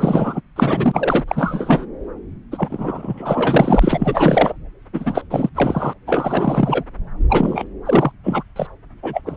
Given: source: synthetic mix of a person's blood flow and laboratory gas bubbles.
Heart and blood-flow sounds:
Doppler ultrasound of blood flow; subclavian vein
0.00-0.42 s: bubbles
0.56-1.24 s: bubbles
1.28-1.86 s: bubbles
2.51-4.53 s: bubbles
4.92-5.23 s: bubbles
5.31-5.50 s: bubbles
5.54-5.94 s: bubbles
6.07-6.84 s: bubbles
7.29-7.67 s: bubbles
7.85-8.12 s: bubbles
8.23-8.43 s: bubbles
8.55-8.67 s: bubbles
9.02-9.21 s: bubbles
9.26-9.37 s: bubbles
From the record:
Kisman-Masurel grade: 444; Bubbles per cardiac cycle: continuous sound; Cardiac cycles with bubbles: 100%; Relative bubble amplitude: maximal (0.775 to 0.999); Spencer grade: 4 (maximum detectable bubble signal sounding continuously throughout systole and diastole of every cardiac period, and overriding the amplitude of the normal cardiac signals); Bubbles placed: anywhere in the cardiac cycle

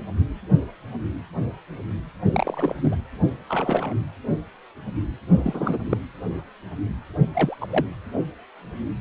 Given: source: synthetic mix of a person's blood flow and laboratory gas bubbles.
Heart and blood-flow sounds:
Doppler ultrasound of blood flow; precordium
2.30-2.95 s: bubbles
3.48-3.94 s: bubbles
5.38-5.78 s: bubbles
5.90-5.97 s: bubbles
7.33-7.57 s: bubbles
7.61-7.67 s: bubbles
7.70-7.86 s: bubbles
From the record:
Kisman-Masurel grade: 222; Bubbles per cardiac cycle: several, 3 to 8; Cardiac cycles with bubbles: 10 to 50%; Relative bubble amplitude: moderate (0.250 to 0.450); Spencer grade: 2 (many but less than half of the cardiac periods contain bubble signals, singularly or in groups); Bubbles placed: only in the low amplitude regions of the cardiac cycle

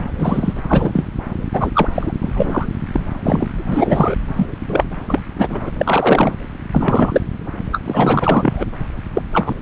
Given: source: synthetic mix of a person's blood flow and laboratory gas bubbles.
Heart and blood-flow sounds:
Doppler ultrasound of blood flow; subclavian vein
0.00-0.04 s: bubbles
0.18-0.53 s: bubbles
0.67-1.04 s: bubbles
1.52-1.71 s: bubbles
1.74-1.89 s: bubbles
1.95-2.12 s: bubbles
2.21-2.67 s: bubbles
2.93-3.06 s: bubbles
3.24-3.48 s: bubbles
3.54-4.15 s: bubbles
4.35-4.46 s: bubbles
4.67-4.84 s: bubbles
5.08-5.19 s: bubbles
5.38-5.70 s: bubbles
5.77-6.32 s: bubbles
6.71-7.21 s: bubbles
7.71-7.81 s: bubbles
7.84-8.66 s: bubbles
9.13-9.23 s: bubbles
9.33-9.55 s: bubbles
From the record:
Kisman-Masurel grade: 243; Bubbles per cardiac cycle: several, 3 to 8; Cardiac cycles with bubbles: 100%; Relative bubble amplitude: loud (0.450 to 0.775); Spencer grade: 3 (all of the cardiac periods contain showers or single bubble signals, but not dominating or overriding the cardiac motion signals); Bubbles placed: anywhere in the cardiac cycle

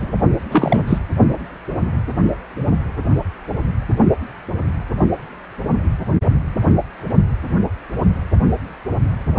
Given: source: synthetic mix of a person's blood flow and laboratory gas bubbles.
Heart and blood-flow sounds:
Doppler ultrasound of blood flow; precordium
0.00-0.12 s: bubbles
0.50-0.98 s: bubbles
From the record:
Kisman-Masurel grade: 222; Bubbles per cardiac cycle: several, 3 to 8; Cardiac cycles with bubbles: 10 to 50%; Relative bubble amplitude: moderate (0.250 to 0.450); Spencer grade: 2 (many but less than half of the cardiac periods contain bubble signals, singularly or in groups); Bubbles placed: only in the low amplitude regions of the cardiac cycle

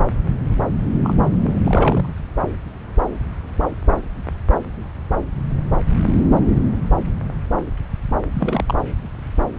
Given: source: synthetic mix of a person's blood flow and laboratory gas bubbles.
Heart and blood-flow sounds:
Doppler ultrasound of blood flow; subclavian vein
1.04-1.60 s: bubbles
1.64-2.06 s: bubbles
8.34-8.74 s: bubbles
From the record:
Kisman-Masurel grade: 212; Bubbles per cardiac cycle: several, 3 to 8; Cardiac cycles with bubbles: 1 to 10%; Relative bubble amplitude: moderate (0.250 to 0.450); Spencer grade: 1 (occasional bubble signal discernible with the cardiac motion signal, with majority of cardiac periods free of bubbles); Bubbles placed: anywhere in the cardiac cycle

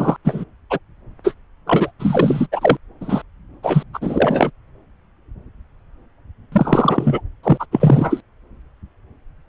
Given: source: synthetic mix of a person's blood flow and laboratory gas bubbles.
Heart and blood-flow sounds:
Doppler ultrasound of blood flow; subclavian vein
0.00-0.17 s: bubbles
0.25-0.45 s: bubbles
0.70-0.79 s: bubbles
1.24-1.34 s: bubbles
1.66-1.91 s: bubbles
1.99-2.46 s: bubbles
2.52-2.77 s: bubbles
3.00-3.22 s: bubbles
3.63-3.83 s: bubbles
3.93-4.50 s: bubbles
6.52-7.21 s: bubbles
7.43-7.66 s: bubbles
7.71-8.20 s: bubbles
From the record:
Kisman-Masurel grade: 333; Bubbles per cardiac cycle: rolling drumbeat, 9 or more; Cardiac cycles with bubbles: 50 to 99%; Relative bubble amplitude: loud (0.450 to 0.775); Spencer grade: 3 (all of the cardiac periods contain showers or single bubble signals, but not dominating or overriding the cardiac motion signals); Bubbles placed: anywhere in the cardiac cycle

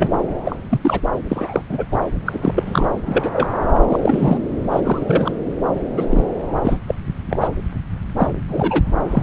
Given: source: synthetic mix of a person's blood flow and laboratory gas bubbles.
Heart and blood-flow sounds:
Doppler ultrasound of blood flow; subclavian vein
0.00-0.08 s: bubbles
0.45-0.56 s: bubbles
0.69-0.79 s: bubbles
0.81-1.00 s: bubbles
1.29-1.62 s: bubbles
1.69-1.86 s: bubbles
1.92-2.00 s: bubbles
2.25-2.88 s: bubbles
3.06-3.48 s: bubbles
3.89-3.99 s: bubbles
4.01-4.38 s: bubbles
4.71-4.80 s: bubbles
4.83-5.32 s: bubbles
5.96-6.05 s: bubbles
6.10-6.23 s: bubbles
6.64-6.78 s: bubbles
6.87-6.95 s: bubbles
7.29-7.47 s: bubbles
8.18-8.29 s: bubbles
8.49-8.84 s: bubbles
9.12-9.22 s: bubbles
From the record:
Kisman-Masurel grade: 243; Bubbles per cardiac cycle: several, 3 to 8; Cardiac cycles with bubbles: 100%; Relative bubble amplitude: loud (0.450 to 0.775); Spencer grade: 3 (all of the cardiac periods contain showers or single bubble signals, but not dominating or overriding the cardiac motion signals); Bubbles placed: anywhere in the cardiac cycle

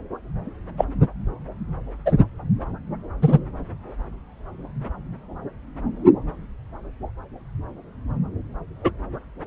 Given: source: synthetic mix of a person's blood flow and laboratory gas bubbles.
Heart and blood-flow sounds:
Doppler ultrasound of blood flow; subclavian vein
0.78-0.85 s: bubbles
2.06-2.12 s: bubbles
3.22-3.39 s: bubbles
8.83-8.91 s: bubbles
From the record:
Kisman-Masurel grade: 123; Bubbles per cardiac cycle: 1 to 2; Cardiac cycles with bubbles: 10 to 50%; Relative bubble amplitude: loud (0.450 to 0.775); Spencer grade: 2 (many but less than half of the cardiac periods contain bubble signals, singularly or in groups); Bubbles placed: anywhere in the cardiac cycle

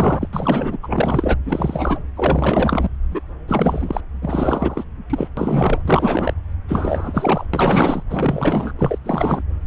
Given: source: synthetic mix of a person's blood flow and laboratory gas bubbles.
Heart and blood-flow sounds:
Doppler ultrasound of blood flow; subclavian vein
0.00-0.28 s: bubbles
0.32-0.77 s: bubbles
0.82-1.38 s: bubbles
1.45-2.02 s: bubbles
2.16-2.88 s: bubbles
3.11-3.21 s: bubbles
3.47-4.00 s: bubbles
4.21-4.85 s: bubbles
5.10-5.29 s: bubbles
5.37-5.82 s: bubbles
5.85-6.33 s: bubbles
6.67-7.46 s: bubbles
7.53-8.03 s: bubbles
8.10-8.72 s: bubbles
8.78-8.98 s: bubbles
9.04-9.43 s: bubbles
From the record:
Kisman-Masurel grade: 444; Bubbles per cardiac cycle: continuous sound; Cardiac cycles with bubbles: 100%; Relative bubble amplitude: maximal (0.775 to 0.999); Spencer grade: 4 (maximum detectable bubble signal sounding continuously throughout systole and diastole of every cardiac period, and overriding the amplitude of the normal cardiac signals); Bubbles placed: anywhere in the cardiac cycle

